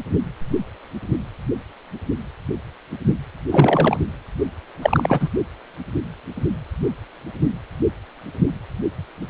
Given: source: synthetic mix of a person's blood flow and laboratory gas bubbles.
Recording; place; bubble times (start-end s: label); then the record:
Doppler ultrasound of blood flow; precordium
3.51-3.99 s: bubbles
4.81-5.30 s: bubbles
From the record:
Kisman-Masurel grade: 223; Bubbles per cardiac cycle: several, 3 to 8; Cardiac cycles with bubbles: 10 to 50%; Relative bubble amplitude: loud (0.450 to 0.775); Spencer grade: 2 (many but less than half of the cardiac periods contain bubble signals, singularly or in groups); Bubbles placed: only in the low amplitude regions of the cardiac cycle